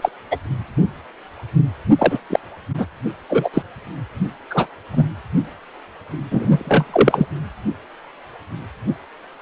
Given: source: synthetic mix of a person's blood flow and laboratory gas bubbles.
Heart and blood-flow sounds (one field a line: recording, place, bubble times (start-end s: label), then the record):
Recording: Doppler ultrasound of blood flow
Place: precordium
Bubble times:
0.00-0.09 s: bubbles
0.31-0.36 s: bubbles
1.98-2.19 s: bubbles
2.29-2.40 s: bubbles
2.78-2.87 s: bubbles
3.29-3.49 s: bubbles
3.54-3.62 s: bubbles
4.50-4.71 s: bubbles
4.92-5.04 s: bubbles
6.30-7.26 s: bubbles
From the record:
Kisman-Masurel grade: 233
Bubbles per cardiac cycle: several, 3 to 8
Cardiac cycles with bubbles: 50 to 99%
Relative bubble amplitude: loud (0.450 to 0.775)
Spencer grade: 3 (all of the cardiac periods contain showers or single bubble signals, but not dominating or overriding the cardiac motion signals)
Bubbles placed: anywhere in the cardiac cycle